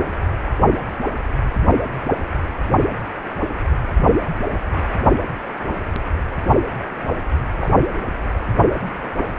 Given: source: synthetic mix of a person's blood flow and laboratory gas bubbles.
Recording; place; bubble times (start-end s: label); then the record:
Doppler ultrasound of blood flow; precordium
7.56-7.69 s: bubbles
From the record:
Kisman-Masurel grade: 122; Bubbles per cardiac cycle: 1 to 2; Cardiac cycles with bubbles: 10 to 50%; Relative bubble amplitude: moderate (0.250 to 0.450); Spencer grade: 2 (many but less than half of the cardiac periods contain bubble signals, singularly or in groups); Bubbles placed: anywhere in the cardiac cycle